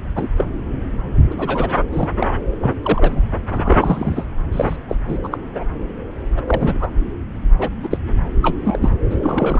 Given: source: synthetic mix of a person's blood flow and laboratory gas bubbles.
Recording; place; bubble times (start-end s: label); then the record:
Doppler ultrasound of blood flow; subclavian vein
0.15-0.28 s: bubbles
0.36-0.45 s: bubbles
1.30-1.35 s: bubbles
1.38-1.69 s: bubbles
1.92-2.09 s: bubbles
2.19-2.27 s: bubbles
2.62-2.71 s: bubbles
2.82-3.21 s: bubbles
3.48-4.27 s: bubbles
4.52-4.77 s: bubbles
4.88-4.96 s: bubbles
5.08-5.18 s: bubbles
5.23-5.38 s: bubbles
5.55-5.64 s: bubbles
6.37-6.43 s: bubbles
6.47-6.91 s: bubbles
7.58-7.71 s: bubbles
7.83-7.88 s: bubbles
7.91-7.98 s: bubbles
8.42-8.56 s: bubbles
8.58-8.90 s: bubbles
9.10-9.60 s: bubbles
From the record:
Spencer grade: 3 (all of the cardiac periods contain showers or single bubble signals, but not dominating or overriding the cardiac motion signals); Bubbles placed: anywhere in the cardiac cycle